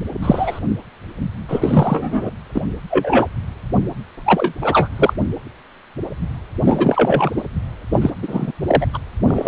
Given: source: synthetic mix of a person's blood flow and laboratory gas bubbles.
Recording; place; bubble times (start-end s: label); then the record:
Doppler ultrasound of blood flow; precordium
0.22-0.60 s: bubbles
1.48-2.31 s: bubbles
2.54-2.60 s: bubbles
2.90-3.27 s: bubbles
4.25-4.53 s: bubbles
4.62-4.88 s: bubbles
4.97-5.13 s: bubbles
6.65-7.30 s: bubbles
7.37-7.43 s: bubbles
7.93-8.10 s: bubbles
8.22-8.52 s: bubbles
8.67-8.86 s: bubbles
8.93-8.97 s: bubbles
9.27-9.48 s: bubbles
From the record:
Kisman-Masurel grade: 233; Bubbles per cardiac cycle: several, 3 to 8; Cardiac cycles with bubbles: 50 to 99%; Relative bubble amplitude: loud (0.450 to 0.775); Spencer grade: 3 (all of the cardiac periods contain showers or single bubble signals, but not dominating or overriding the cardiac motion signals); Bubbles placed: anywhere in the cardiac cycle